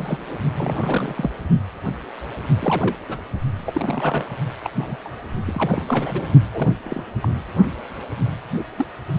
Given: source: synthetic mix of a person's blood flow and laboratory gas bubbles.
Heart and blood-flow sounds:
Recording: Doppler ultrasound of blood flow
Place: precordium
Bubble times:
0.00-0.38 s: bubbles
0.56-1.30 s: bubbles
2.60-2.96 s: bubbles
3.08-3.19 s: bubbles
3.58-4.37 s: bubbles
4.63-4.71 s: bubbles
4.75-4.96 s: bubbles
5.04-5.09 s: bubbles
5.46-6.27 s: bubbles
6.40-6.71 s: bubbles
6.83-7.03 s: bubbles
7.21-7.32 s: bubbles
8.76-8.86 s: bubbles
9.06-9.19 s: bubbles
From the record:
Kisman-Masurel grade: 232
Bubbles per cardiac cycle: several, 3 to 8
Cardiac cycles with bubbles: 50 to 99%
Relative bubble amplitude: moderate (0.250 to 0.450)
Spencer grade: 3 (all of the cardiac periods contain showers or single bubble signals, but not dominating or overriding the cardiac motion signals)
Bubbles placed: only in the low amplitude regions of the cardiac cycle

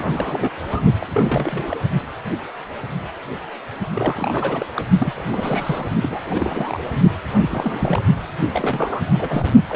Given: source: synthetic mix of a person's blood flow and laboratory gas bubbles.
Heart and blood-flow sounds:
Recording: Doppler ultrasound of blood flow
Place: precordium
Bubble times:
0.00-0.53 s: bubbles
0.68-0.80 s: bubbles
1.00-1.07 s: bubbles
1.11-1.77 s: bubbles
3.94-4.66 s: bubbles
4.75-4.85 s: bubbles
4.98-5.85 s: bubbles
6.03-6.20 s: bubbles
6.26-6.81 s: bubbles
7.37-8.02 s: bubbles
8.53-9.49 s: bubbles
9.69-9.76 s: bubbles
From the record:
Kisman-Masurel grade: 332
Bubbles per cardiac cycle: rolling drumbeat, 9 or more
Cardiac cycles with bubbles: 50 to 99%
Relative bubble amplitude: moderate (0.250 to 0.450)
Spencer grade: 3 (all of the cardiac periods contain showers or single bubble signals, but not dominating or overriding the cardiac motion signals)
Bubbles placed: only in the low amplitude regions of the cardiac cycle

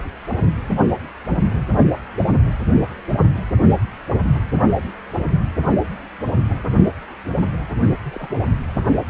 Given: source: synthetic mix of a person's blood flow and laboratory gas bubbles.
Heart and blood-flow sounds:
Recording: Doppler ultrasound of blood flow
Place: precordium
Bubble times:
8.04-8.29 s: bubbles
8.34-8.42 s: bubbles
From the record:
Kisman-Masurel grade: 211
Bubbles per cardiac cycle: several, 3 to 8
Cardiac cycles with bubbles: 1 to 10%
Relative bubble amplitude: barely perceptible (0.100 to 0.250)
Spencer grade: 1 (occasional bubble signal discernible with the cardiac motion signal, with majority of cardiac periods free of bubbles)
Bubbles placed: only in the low amplitude regions of the cardiac cycle

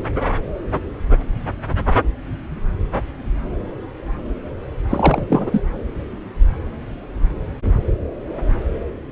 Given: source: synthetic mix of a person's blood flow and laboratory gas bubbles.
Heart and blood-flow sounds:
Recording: Doppler ultrasound of blood flow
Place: subclavian vein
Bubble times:
4.89-5.22 s: bubbles
5.29-5.63 s: bubbles
From the record:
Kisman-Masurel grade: 213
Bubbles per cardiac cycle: several, 3 to 8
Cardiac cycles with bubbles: 1 to 10%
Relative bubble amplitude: loud (0.450 to 0.775)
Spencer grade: 1 (occasional bubble signal discernible with the cardiac motion signal, with majority of cardiac periods free of bubbles)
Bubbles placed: anywhere in the cardiac cycle

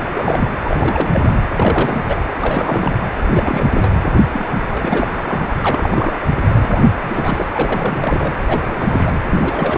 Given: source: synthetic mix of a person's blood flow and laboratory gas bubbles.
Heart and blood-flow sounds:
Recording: Doppler ultrasound of blood flow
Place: precordium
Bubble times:
0.06-0.11 s: bubbles
0.14-0.48 s: bubbles
0.65-1.09 s: bubbles
1.12-1.38 s: bubbles
1.48-2.02 s: bubbles
2.06-2.21 s: bubbles
2.38-2.98 s: bubbles
3.31-3.90 s: bubbles
4.32-4.48 s: bubbles
4.69-5.07 s: bubbles
5.15-5.57 s: bubbles
5.61-6.18 s: bubbles
6.39-6.66 s: bubbles
6.70-6.83 s: bubbles
7.02-7.50 s: bubbles
7.54-8.32 s: bubbles
8.47-9.14 s: bubbles
9.29-9.78 s: bubbles
From the record:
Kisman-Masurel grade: 342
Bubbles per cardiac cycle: rolling drumbeat, 9 or more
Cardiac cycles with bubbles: 100%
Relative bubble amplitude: moderate (0.250 to 0.450)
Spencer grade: 3 (all of the cardiac periods contain showers or single bubble signals, but not dominating or overriding the cardiac motion signals)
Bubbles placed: anywhere in the cardiac cycle

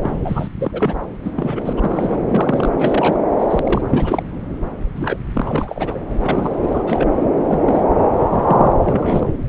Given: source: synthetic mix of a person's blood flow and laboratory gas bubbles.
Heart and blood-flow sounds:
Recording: Doppler ultrasound of blood flow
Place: subclavian vein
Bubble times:
0.00-0.48 s: bubbles
0.56-0.94 s: bubbles
1.24-1.31 s: bubbles
1.35-1.73 s: bubbles
1.77-2.20 s: bubbles
2.27-2.73 s: bubbles
2.79-3.19 s: bubbles
3.38-3.61 s: bubbles
3.65-3.81 s: bubbles
3.93-4.23 s: bubbles
4.96-5.17 s: bubbles
5.33-5.42 s: bubbles
5.46-6.00 s: bubbles
6.18-6.58 s: bubbles
6.61-6.69 s: bubbles
6.74-7.12 s: bubbles
7.45-7.84 s: bubbles
8.20-8.73 s: bubbles
8.83-9.29 s: bubbles
From the record:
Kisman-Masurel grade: 242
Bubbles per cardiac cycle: several, 3 to 8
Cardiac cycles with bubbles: 100%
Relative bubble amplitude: moderate (0.250 to 0.450)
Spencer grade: 3 (all of the cardiac periods contain showers or single bubble signals, but not dominating or overriding the cardiac motion signals)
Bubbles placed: anywhere in the cardiac cycle

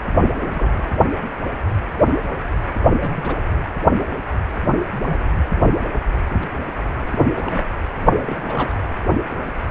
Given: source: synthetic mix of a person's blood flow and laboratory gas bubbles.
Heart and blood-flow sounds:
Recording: Doppler ultrasound of blood flow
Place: precordium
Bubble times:
0.18-0.96 s: bubbles
2.89-3.36 s: bubbles
5.06-5.19 s: bubbles
5.54-5.71 s: bubbles
5.84-5.89 s: bubbles
6.29-6.55 s: bubbles
7.08-7.26 s: bubbles
7.34-7.65 s: bubbles
8.27-8.74 s: bubbles
From the record:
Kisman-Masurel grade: 221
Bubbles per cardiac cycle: several, 3 to 8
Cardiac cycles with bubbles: 10 to 50%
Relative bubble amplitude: barely perceptible (0.100 to 0.250)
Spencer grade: 2 (many but less than half of the cardiac periods contain bubble signals, singularly or in groups)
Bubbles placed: anywhere in the cardiac cycle

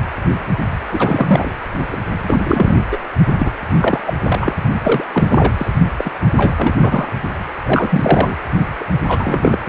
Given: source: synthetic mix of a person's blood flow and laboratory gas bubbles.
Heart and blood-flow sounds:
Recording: Doppler ultrasound of blood flow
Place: precordium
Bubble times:
0.92-1.51 s: bubbles
1.91-1.97 s: bubbles
2.23-2.73 s: bubbles
2.91-2.98 s: bubbles
3.38-3.50 s: bubbles
3.80-4.00 s: bubbles
4.06-4.14 s: bubbles
4.25-4.54 s: bubbles
4.83-5.04 s: bubbles
5.13-5.54 s: bubbles
5.57-5.71 s: bubbles
5.96-6.11 s: bubbles
6.37-6.54 s: bubbles
6.57-6.75 s: bubbles
6.81-7.12 s: bubbles
7.66-8.35 s: bubbles
8.80-8.84 s: bubbles
9.07-9.58 s: bubbles
9.66-9.69 s: bubbles
From the record:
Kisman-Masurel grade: 333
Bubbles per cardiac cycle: rolling drumbeat, 9 or more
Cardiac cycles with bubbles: 50 to 99%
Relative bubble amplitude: loud (0.450 to 0.775)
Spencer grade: 3 (all of the cardiac periods contain showers or single bubble signals, but not dominating or overriding the cardiac motion signals)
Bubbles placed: only in the low amplitude regions of the cardiac cycle

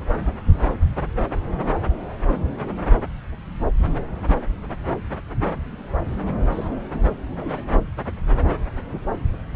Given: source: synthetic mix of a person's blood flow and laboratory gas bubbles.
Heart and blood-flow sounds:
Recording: Doppler ultrasound of blood flow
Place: subclavian vein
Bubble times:
6.52-6.68 s: bubbles
6.93-7.01 s: bubbles
7.36-7.61 s: bubbles
7.69-7.81 s: bubbles
From the record:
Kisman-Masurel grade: 211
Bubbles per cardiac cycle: several, 3 to 8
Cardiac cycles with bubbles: 1 to 10%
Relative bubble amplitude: barely perceptible (0.100 to 0.250)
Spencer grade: 1 (occasional bubble signal discernible with the cardiac motion signal, with majority of cardiac periods free of bubbles)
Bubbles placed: anywhere in the cardiac cycle

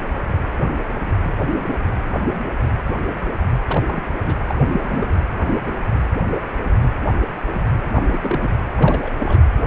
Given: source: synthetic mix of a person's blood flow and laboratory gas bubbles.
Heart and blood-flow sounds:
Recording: Doppler ultrasound of blood flow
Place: precordium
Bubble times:
3.68-4.12 s: bubbles
4.21-4.38 s: bubbles
4.48-4.61 s: bubbles
4.71-5.17 s: bubbles
7.96-8.02 s: bubbles
8.07-8.53 s: bubbles
8.77-9.12 s: bubbles
9.20-9.45 s: bubbles
9.54-9.67 s: bubbles
From the record:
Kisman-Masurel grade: 221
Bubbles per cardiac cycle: several, 3 to 8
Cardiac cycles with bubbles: 10 to 50%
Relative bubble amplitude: barely perceptible (0.100 to 0.250)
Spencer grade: 2 (many but less than half of the cardiac periods contain bubble signals, singularly or in groups)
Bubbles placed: anywhere in the cardiac cycle

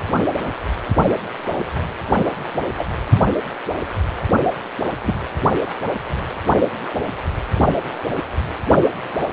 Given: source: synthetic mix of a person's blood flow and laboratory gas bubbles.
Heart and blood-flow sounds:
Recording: Doppler ultrasound of blood flow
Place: precordium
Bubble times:
2.77-2.85 s: bubbles
5.04-5.15 s: bubbles
From the record:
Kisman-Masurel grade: 122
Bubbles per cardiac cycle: 1 to 2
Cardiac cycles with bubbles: 10 to 50%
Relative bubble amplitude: moderate (0.250 to 0.450)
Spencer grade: 2 (many but less than half of the cardiac periods contain bubble signals, singularly or in groups)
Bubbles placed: anywhere in the cardiac cycle

